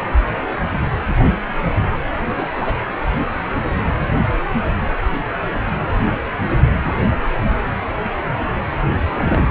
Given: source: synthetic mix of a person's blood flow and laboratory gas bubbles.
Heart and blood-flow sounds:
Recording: Doppler ultrasound of blood flow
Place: precordium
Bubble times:
2.28-2.48 s: bubbles
2.51-2.75 s: bubbles
9.13-9.42 s: bubbles
From the record:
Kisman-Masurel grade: 212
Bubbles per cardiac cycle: several, 3 to 8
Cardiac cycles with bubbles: 1 to 10%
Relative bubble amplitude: moderate (0.250 to 0.450)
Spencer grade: 1 (occasional bubble signal discernible with the cardiac motion signal, with majority of cardiac periods free of bubbles)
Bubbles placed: anywhere in the cardiac cycle

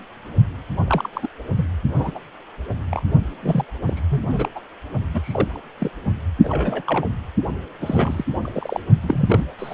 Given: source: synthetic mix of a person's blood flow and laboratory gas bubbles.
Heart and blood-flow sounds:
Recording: Doppler ultrasound of blood flow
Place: precordium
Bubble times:
0.87-1.09 s: bubbles
1.13-1.28 s: bubbles
1.56-1.66 s: bubbles
1.95-2.12 s: bubbles
2.15-2.19 s: bubbles
2.91-3.03 s: bubbles
3.42-3.65 s: bubbles
3.87-4.00 s: bubbles
4.09-4.49 s: bubbles
4.55-4.60 s: bubbles
5.13-5.62 s: bubbles
5.79-5.90 s: bubbles
6.44-6.83 s: bubbles
6.86-7.08 s: bubbles
7.81-8.25 s: bubbles
8.42-8.82 s: bubbles
9.02-9.45 s: bubbles
9.59-9.74 s: bubbles
From the record:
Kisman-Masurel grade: 242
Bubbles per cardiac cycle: several, 3 to 8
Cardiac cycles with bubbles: 100%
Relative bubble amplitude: moderate (0.250 to 0.450)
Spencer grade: 3 (all of the cardiac periods contain showers or single bubble signals, but not dominating or overriding the cardiac motion signals)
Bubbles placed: only in the low amplitude regions of the cardiac cycle

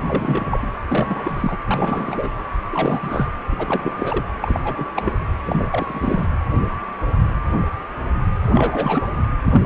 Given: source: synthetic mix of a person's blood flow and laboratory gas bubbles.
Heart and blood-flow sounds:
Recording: Doppler ultrasound of blood flow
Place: precordium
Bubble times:
0.00-0.04 s: bubbles
0.06-0.67 s: bubbles
0.88-1.58 s: bubbles
1.67-2.29 s: bubbles
2.71-3.35 s: bubbles
3.52-4.25 s: bubbles
4.41-4.60 s: bubbles
4.64-4.92 s: bubbles
4.96-5.12 s: bubbles
5.46-6.26 s: bubbles
8.46-9.08 s: bubbles
9.46-9.66 s: bubbles
From the record:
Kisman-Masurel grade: 332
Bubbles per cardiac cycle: rolling drumbeat, 9 or more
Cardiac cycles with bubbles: 50 to 99%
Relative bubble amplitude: moderate (0.250 to 0.450)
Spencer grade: 3 (all of the cardiac periods contain showers or single bubble signals, but not dominating or overriding the cardiac motion signals)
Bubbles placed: anywhere in the cardiac cycle

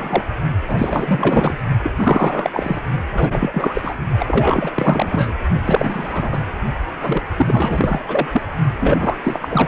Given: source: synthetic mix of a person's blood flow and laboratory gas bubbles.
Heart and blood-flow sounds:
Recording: Doppler ultrasound of blood flow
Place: precordium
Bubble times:
0.00-0.23 s: bubbles
0.68-1.58 s: bubbles
1.83-1.91 s: bubbles
1.96-2.79 s: bubbles
3.12-3.94 s: bubbles
4.19-4.71 s: bubbles
4.75-5.34 s: bubbles
5.65-6.42 s: bubbles
7.01-7.22 s: bubbles
7.37-8.04 s: bubbles
8.08-8.27 s: bubbles
8.32-8.42 s: bubbles
8.80-9.17 s: bubbles
9.24-9.68 s: bubbles
From the record:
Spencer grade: 4 (maximum detectable bubble signal sounding continuously throughout systole and diastole of every cardiac period, and overriding the amplitude of the normal cardiac signals)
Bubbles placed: only in the low amplitude regions of the cardiac cycle

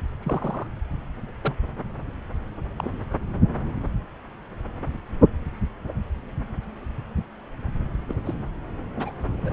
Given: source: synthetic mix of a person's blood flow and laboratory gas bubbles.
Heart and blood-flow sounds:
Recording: Doppler ultrasound of blood flow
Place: subclavian vein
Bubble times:
0.23-0.66 s: bubbles
1.42-1.54 s: bubbles
2.77-2.99 s: bubbles
8.08-8.13 s: bubbles
8.25-8.34 s: bubbles
8.96-9.10 s: bubbles
9.36-9.53 s: bubbles
From the record:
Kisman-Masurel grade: 121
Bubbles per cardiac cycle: 1 to 2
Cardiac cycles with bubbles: 10 to 50%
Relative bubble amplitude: barely perceptible (0.100 to 0.250)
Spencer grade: 2 (many but less than half of the cardiac periods contain bubble signals, singularly or in groups)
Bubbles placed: anywhere in the cardiac cycle

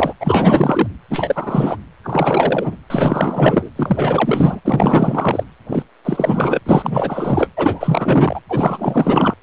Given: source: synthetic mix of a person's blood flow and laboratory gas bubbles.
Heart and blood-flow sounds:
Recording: Doppler ultrasound of blood flow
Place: precordium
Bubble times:
0.00-0.14 s: bubbles
0.20-0.88 s: bubbles
1.10-1.78 s: bubbles
2.04-2.77 s: bubbles
2.90-3.70 s: bubbles
3.76-4.60 s: bubbles
4.64-5.43 s: bubbles
5.68-5.83 s: bubbles
6.05-6.61 s: bubbles
6.65-7.48 s: bubbles
7.56-8.40 s: bubbles
8.49-9.34 s: bubbles
From the record:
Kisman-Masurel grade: 444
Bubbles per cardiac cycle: continuous sound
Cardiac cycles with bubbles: 100%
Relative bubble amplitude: maximal (0.775 to 0.999)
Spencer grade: 4 (maximum detectable bubble signal sounding continuously throughout systole and diastole of every cardiac period, and overriding the amplitude of the normal cardiac signals)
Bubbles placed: anywhere in the cardiac cycle

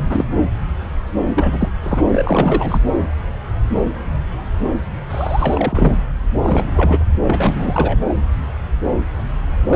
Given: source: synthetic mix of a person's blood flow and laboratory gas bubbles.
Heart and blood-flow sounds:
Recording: Doppler ultrasound of blood flow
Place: subclavian vein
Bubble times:
0.00-0.03 s: bubbles
0.09-0.25 s: bubbles
1.27-1.71 s: bubbles
1.83-2.03 s: bubbles
2.12-2.82 s: bubbles
5.10-5.97 s: bubbles
6.42-7.04 s: bubbles
7.27-8.00 s: bubbles
8.09-8.14 s: bubbles
9.66-9.76 s: bubbles
From the record:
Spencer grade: 3 (all of the cardiac periods contain showers or single bubble signals, but not dominating or overriding the cardiac motion signals)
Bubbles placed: anywhere in the cardiac cycle

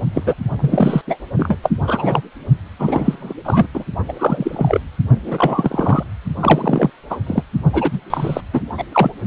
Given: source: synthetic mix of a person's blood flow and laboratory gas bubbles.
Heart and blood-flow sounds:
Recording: Doppler ultrasound of blood flow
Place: precordium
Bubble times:
0.13-0.34 s: bubbles
0.59-1.02 s: bubbles
1.07-1.17 s: bubbles
1.36-1.57 s: bubbles
1.62-1.70 s: bubbles
1.87-2.21 s: bubbles
2.79-3.33 s: bubbles
3.44-3.66 s: bubbles
3.73-3.84 s: bubbles
4.08-4.12 s: bubbles
4.18-4.79 s: bubbles
5.25-6.03 s: bubbles
6.40-6.90 s: bubbles
7.09-7.18 s: bubbles
7.26-7.43 s: bubbles
7.73-8.00 s: bubbles
8.10-8.41 s: bubbles
8.52-8.61 s: bubbles
8.77-8.83 s: bubbles
8.92-9.11 s: bubbles
From the record:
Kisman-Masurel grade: 243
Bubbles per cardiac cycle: several, 3 to 8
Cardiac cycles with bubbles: 100%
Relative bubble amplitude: loud (0.450 to 0.775)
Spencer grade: 3 (all of the cardiac periods contain showers or single bubble signals, but not dominating or overriding the cardiac motion signals)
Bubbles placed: only in the low amplitude regions of the cardiac cycle

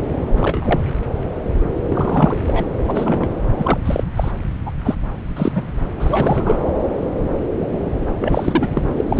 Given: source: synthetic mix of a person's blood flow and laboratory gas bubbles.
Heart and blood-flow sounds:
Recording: Doppler ultrasound of blood flow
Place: subclavian vein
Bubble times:
0.36-0.80 s: bubbles
1.88-2.66 s: bubbles
2.83-3.29 s: bubbles
3.58-3.77 s: bubbles
3.85-4.04 s: bubbles
4.17-4.32 s: bubbles
4.66-4.71 s: bubbles
4.84-4.94 s: bubbles
5.36-5.52 s: bubbles
5.54-5.63 s: bubbles
6.00-6.69 s: bubbles
8.19-8.69 s: bubbles
8.73-8.82 s: bubbles
8.96-9.04 s: bubbles
9.10-9.20 s: bubbles
From the record:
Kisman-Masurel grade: 233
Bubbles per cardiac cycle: several, 3 to 8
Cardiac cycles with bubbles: 50 to 99%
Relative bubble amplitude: loud (0.450 to 0.775)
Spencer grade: 3 (all of the cardiac periods contain showers or single bubble signals, but not dominating or overriding the cardiac motion signals)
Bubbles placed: anywhere in the cardiac cycle

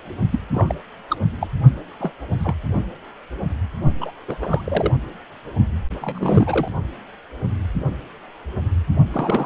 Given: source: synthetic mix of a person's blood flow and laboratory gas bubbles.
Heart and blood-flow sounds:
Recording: Doppler ultrasound of blood flow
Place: precordium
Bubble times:
0.31-0.39 s: bubbles
0.53-0.75 s: bubbles
1.10-1.17 s: bubbles
1.40-1.48 s: bubbles
2.00-2.13 s: bubbles
2.39-2.55 s: bubbles
4.00-4.12 s: bubbles
4.27-4.36 s: bubbles
4.39-4.61 s: bubbles
4.64-4.92 s: bubbles
6.01-6.68 s: bubbles
9.12-9.46 s: bubbles
From the record:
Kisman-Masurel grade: 232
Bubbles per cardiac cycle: several, 3 to 8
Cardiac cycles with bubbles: 50 to 99%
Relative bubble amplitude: moderate (0.250 to 0.450)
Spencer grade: 3 (all of the cardiac periods contain showers or single bubble signals, but not dominating or overriding the cardiac motion signals)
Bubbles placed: only in the low amplitude regions of the cardiac cycle

